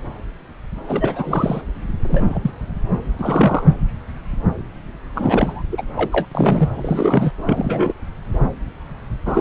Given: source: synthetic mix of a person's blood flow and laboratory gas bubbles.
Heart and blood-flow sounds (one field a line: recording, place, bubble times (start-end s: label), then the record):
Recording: Doppler ultrasound of blood flow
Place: subclavian vein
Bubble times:
0.88-1.61 s: bubbles
2.03-2.39 s: bubbles
2.42-2.52 s: bubbles
3.19-3.63 s: bubbles
5.15-5.62 s: bubbles
5.71-5.82 s: bubbles
5.96-6.10 s: bubbles
6.12-6.28 s: bubbles
6.31-6.70 s: bubbles
6.74-7.31 s: bubbles
7.46-7.93 s: bubbles
9.26-9.41 s: bubbles
From the record:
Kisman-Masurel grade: 233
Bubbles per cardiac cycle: several, 3 to 8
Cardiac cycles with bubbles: 50 to 99%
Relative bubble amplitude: loud (0.450 to 0.775)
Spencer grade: 3 (all of the cardiac periods contain showers or single bubble signals, but not dominating or overriding the cardiac motion signals)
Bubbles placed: anywhere in the cardiac cycle